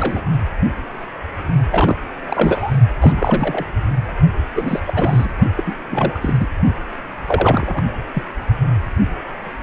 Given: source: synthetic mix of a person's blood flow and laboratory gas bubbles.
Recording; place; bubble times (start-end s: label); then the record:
Doppler ultrasound of blood flow; precordium
0.00-0.21 s: bubbles
1.71-1.96 s: bubbles
2.26-2.77 s: bubbles
3.00-3.66 s: bubbles
4.55-4.80 s: bubbles
4.87-5.33 s: bubbles
5.55-5.63 s: bubbles
5.67-5.75 s: bubbles
5.91-6.47 s: bubbles
7.26-7.83 s: bubbles
8.14-8.23 s: bubbles
From the record:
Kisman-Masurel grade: 332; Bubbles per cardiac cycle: rolling drumbeat, 9 or more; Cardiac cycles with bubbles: 50 to 99%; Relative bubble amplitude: moderate (0.250 to 0.450); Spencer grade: 3 (all of the cardiac periods contain showers or single bubble signals, but not dominating or overriding the cardiac motion signals); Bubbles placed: only in the low amplitude regions of the cardiac cycle